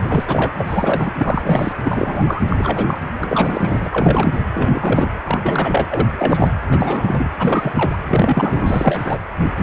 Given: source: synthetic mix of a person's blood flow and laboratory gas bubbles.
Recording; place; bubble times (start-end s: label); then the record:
Doppler ultrasound of blood flow; precordium
0.01-0.52 s: bubbles
0.58-1.11 s: bubbles
1.20-1.72 s: bubbles
1.83-2.24 s: bubbles
2.27-2.42 s: bubbles
2.49-3.02 s: bubbles
3.20-4.41 s: bubbles
4.54-5.12 s: bubbles
5.25-5.86 s: bubbles
5.90-6.08 s: bubbles
6.18-6.50 s: bubbles
6.69-7.31 s: bubbles
7.38-7.98 s: bubbles
8.05-9.19 s: bubbles
From the record:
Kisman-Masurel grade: 343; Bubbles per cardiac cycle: rolling drumbeat, 9 or more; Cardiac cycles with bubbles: 100%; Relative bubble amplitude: loud (0.450 to 0.775); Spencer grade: 3 (all of the cardiac periods contain showers or single bubble signals, but not dominating or overriding the cardiac motion signals); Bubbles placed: anywhere in the cardiac cycle